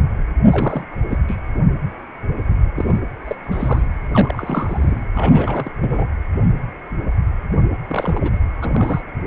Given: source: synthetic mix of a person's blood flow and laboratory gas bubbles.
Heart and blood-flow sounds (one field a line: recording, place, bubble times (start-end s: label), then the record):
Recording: Doppler ultrasound of blood flow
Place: precordium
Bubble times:
0.51-0.85 s: bubbles
1.10-1.20 s: bubbles
1.29-1.37 s: bubbles
2.75-2.99 s: bubbles
3.25-3.35 s: bubbles
3.44-3.86 s: bubbles
4.12-5.08 s: bubbles
5.16-5.71 s: bubbles
5.80-6.06 s: bubbles
7.88-8.39 s: bubbles
8.60-9.01 s: bubbles
From the record:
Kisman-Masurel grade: 232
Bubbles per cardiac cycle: several, 3 to 8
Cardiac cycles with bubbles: 50 to 99%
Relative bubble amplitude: moderate (0.250 to 0.450)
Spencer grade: 3 (all of the cardiac periods contain showers or single bubble signals, but not dominating or overriding the cardiac motion signals)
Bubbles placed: anywhere in the cardiac cycle